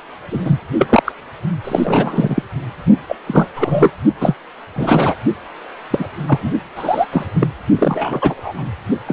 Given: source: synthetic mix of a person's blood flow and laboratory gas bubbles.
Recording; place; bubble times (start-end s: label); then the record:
Doppler ultrasound of blood flow; precordium
0.30-0.59 s: bubbles
0.79-1.02 s: bubbles
1.05-1.12 s: bubbles
1.64-2.43 s: bubbles
3.08-3.16 s: bubbles
3.27-3.49 s: bubbles
3.56-3.92 s: bubbles
4.21-4.35 s: bubbles
4.75-5.15 s: bubbles
5.91-6.08 s: bubbles
6.26-6.53 s: bubbles
6.75-7.06 s: bubbles
7.12-7.25 s: bubbles
7.34-7.48 s: bubbles
7.78-8.64 s: bubbles
9.06-9.13 s: bubbles
From the record:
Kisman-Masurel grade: 233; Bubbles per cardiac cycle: several, 3 to 8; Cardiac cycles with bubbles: 50 to 99%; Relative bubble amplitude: loud (0.450 to 0.775); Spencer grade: 3 (all of the cardiac periods contain showers or single bubble signals, but not dominating or overriding the cardiac motion signals); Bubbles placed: only in the low amplitude regions of the cardiac cycle